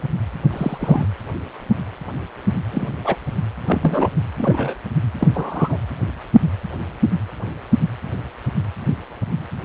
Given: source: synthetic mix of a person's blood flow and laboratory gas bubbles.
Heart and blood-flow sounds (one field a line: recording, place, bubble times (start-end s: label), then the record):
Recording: Doppler ultrasound of blood flow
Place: precordium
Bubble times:
0.51-1.05 s: bubbles
2.71-2.87 s: bubbles
3.04-3.16 s: bubbles
3.67-4.08 s: bubbles
4.38-4.75 s: bubbles
5.19-5.28 s: bubbles
5.34-5.77 s: bubbles
From the record:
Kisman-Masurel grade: 122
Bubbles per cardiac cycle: 1 to 2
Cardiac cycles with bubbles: 10 to 50%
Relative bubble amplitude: moderate (0.250 to 0.450)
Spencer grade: 2 (many but less than half of the cardiac periods contain bubble signals, singularly or in groups)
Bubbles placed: anywhere in the cardiac cycle